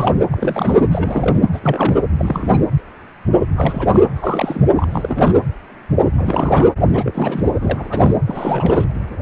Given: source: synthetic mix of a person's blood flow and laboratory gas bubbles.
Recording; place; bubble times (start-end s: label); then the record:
Doppler ultrasound of blood flow; precordium
0.00-0.21 s: bubbles
0.30-0.89 s: bubbles
0.91-1.40 s: bubbles
1.53-1.61 s: bubbles
1.64-2.00 s: bubbles
2.16-2.67 s: bubbles
3.56-3.89 s: bubbles
3.92-4.00 s: bubbles
4.13-4.62 s: bubbles
4.75-5.37 s: bubbles
6.17-6.68 s: bubbles
6.88-7.53 s: bubbles
7.60-8.16 s: bubbles
8.27-8.89 s: bubbles
From the record:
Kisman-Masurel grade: 332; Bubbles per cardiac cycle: rolling drumbeat, 9 or more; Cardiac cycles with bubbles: 50 to 99%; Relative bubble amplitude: moderate (0.250 to 0.450); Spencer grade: 3 (all of the cardiac periods contain showers or single bubble signals, but not dominating or overriding the cardiac motion signals); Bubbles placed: anywhere in the cardiac cycle